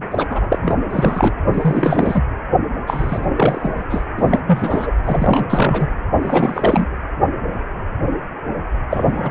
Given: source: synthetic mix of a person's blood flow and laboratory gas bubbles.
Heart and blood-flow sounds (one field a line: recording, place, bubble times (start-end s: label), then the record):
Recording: Doppler ultrasound of blood flow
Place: precordium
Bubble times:
0.00-0.26 s: bubbles
0.29-0.58 s: bubbles
0.62-0.77 s: bubbles
0.91-1.32 s: bubbles
1.54-2.22 s: bubbles
2.86-3.26 s: bubbles
3.36-3.84 s: bubbles
3.89-4.05 s: bubbles
4.17-4.40 s: bubbles
4.46-4.92 s: bubbles
5.04-5.88 s: bubbles
6.21-6.87 s: bubbles
8.90-9.31 s: bubbles
From the record:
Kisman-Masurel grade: 333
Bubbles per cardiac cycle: rolling drumbeat, 9 or more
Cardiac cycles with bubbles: 50 to 99%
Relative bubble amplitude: loud (0.450 to 0.775)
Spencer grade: 3 (all of the cardiac periods contain showers or single bubble signals, but not dominating or overriding the cardiac motion signals)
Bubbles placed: anywhere in the cardiac cycle